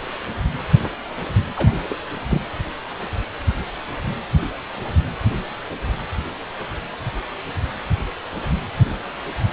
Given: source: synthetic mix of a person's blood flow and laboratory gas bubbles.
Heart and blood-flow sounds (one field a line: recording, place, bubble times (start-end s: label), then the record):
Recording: Doppler ultrasound of blood flow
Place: precordium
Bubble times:
1.56-1.73 s: bubbles
1.90-1.95 s: bubbles
2.28-2.41 s: bubbles
From the record:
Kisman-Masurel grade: 212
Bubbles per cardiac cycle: several, 3 to 8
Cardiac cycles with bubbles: 1 to 10%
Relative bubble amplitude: moderate (0.250 to 0.450)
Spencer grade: 1 (occasional bubble signal discernible with the cardiac motion signal, with majority of cardiac periods free of bubbles)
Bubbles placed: anywhere in the cardiac cycle